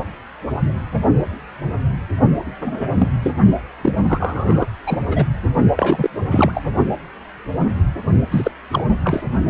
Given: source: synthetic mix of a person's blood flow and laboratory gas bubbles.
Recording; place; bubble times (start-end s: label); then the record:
Doppler ultrasound of blood flow; precordium
2.61-2.90 s: bubbles
2.94-3.11 s: bubbles
3.22-3.33 s: bubbles
3.82-3.92 s: bubbles
4.08-4.66 s: bubbles
4.87-4.98 s: bubbles
5.07-5.26 s: bubbles
5.76-6.10 s: bubbles
6.30-6.63 s: bubbles
8.31-8.51 s: bubbles
8.71-8.84 s: bubbles
9.04-9.25 s: bubbles
From the record:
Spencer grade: 2 (many but less than half of the cardiac periods contain bubble signals, singularly or in groups); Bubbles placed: only in the low amplitude regions of the cardiac cycle